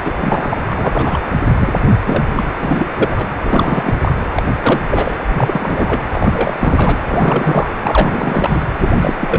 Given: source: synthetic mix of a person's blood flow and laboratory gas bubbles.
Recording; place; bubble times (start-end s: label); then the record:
Doppler ultrasound of blood flow; precordium
0.04-0.14 s: bubbles
0.19-1.20 s: bubbles
1.52-1.73 s: bubbles
2.04-2.24 s: bubbles
2.34-2.44 s: bubbles
2.49-2.51 s: bubbles
2.59-2.87 s: bubbles
2.96-3.28 s: bubbles
3.42-3.94 s: bubbles
4.02-4.13 s: bubbles
4.35-4.43 s: bubbles
4.62-4.80 s: bubbles
4.91-5.17 s: bubbles
5.27-6.03 s: bubbles
6.12-6.54 s: bubbles
6.59-7.74 s: bubbles
7.83-8.63 s: bubbles
8.76-9.16 s: bubbles
9.20-9.39 s: bubbles
From the record:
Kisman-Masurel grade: 342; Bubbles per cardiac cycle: rolling drumbeat, 9 or more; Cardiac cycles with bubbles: 100%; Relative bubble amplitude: moderate (0.250 to 0.450); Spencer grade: 3 (all of the cardiac periods contain showers or single bubble signals, but not dominating or overriding the cardiac motion signals); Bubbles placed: anywhere in the cardiac cycle